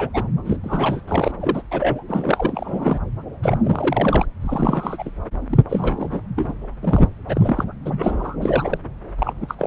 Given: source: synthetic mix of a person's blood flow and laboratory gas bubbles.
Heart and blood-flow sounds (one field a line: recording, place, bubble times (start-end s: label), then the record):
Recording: Doppler ultrasound of blood flow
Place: subclavian vein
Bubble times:
0.00-0.09 s: bubbles
0.13-0.24 s: bubbles
0.45-0.59 s: bubbles
0.63-1.01 s: bubbles
1.07-1.31 s: bubbles
1.40-1.62 s: bubbles
1.71-2.03 s: bubbles
2.08-2.98 s: bubbles
3.43-3.58 s: bubbles
3.64-4.26 s: bubbles
4.41-5.11 s: bubbles
5.50-5.58 s: bubbles
5.69-6.21 s: bubbles
6.36-6.54 s: bubbles
6.82-7.07 s: bubbles
7.28-7.65 s: bubbles
7.85-8.36 s: bubbles
8.41-8.78 s: bubbles
9.18-9.33 s: bubbles
9.40-9.54 s: bubbles
9.58-9.67 s: bubbles
From the record:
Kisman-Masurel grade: 342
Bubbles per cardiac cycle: rolling drumbeat, 9 or more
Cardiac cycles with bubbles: 100%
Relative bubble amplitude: moderate (0.250 to 0.450)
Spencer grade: 3 (all of the cardiac periods contain showers or single bubble signals, but not dominating or overriding the cardiac motion signals)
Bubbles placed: anywhere in the cardiac cycle